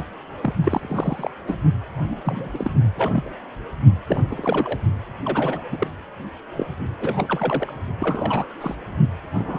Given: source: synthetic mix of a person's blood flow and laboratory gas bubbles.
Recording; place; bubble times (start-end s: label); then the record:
Doppler ultrasound of blood flow; precordium
0.00-0.05 s: bubbles
0.41-0.54 s: bubbles
0.64-1.30 s: bubbles
1.47-1.57 s: bubbles
1.92-2.20 s: bubbles
2.25-2.51 s: bubbles
2.54-2.71 s: bubbles
2.96-3.31 s: bubbles
4.07-4.21 s: bubbles
4.30-4.78 s: bubbles
5.25-5.61 s: bubbles
5.72-5.87 s: bubbles
6.57-6.66 s: bubbles
7.00-7.73 s: bubbles
8.00-8.46 s: bubbles
8.60-8.75 s: bubbles
9.35-9.59 s: bubbles
From the record:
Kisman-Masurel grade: 242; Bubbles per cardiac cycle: several, 3 to 8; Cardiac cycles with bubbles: 100%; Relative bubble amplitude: moderate (0.250 to 0.450); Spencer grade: 3 (all of the cardiac periods contain showers or single bubble signals, but not dominating or overriding the cardiac motion signals); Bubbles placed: only in the low amplitude regions of the cardiac cycle